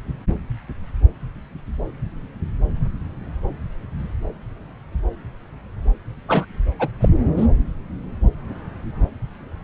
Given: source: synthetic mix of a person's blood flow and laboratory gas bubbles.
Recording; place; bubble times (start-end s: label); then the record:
Doppler ultrasound of blood flow; subclavian vein
6.28-6.45 s: bubbles
6.78-6.88 s: bubbles
7.00-7.08 s: bubbles
7.25-7.31 s: bubbles
7.37-7.46 s: bubbles
From the record:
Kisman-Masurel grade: 212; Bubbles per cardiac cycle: several, 3 to 8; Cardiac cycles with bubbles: 1 to 10%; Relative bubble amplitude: moderate (0.250 to 0.450); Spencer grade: 1 (occasional bubble signal discernible with the cardiac motion signal, with majority of cardiac periods free of bubbles); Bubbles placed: anywhere in the cardiac cycle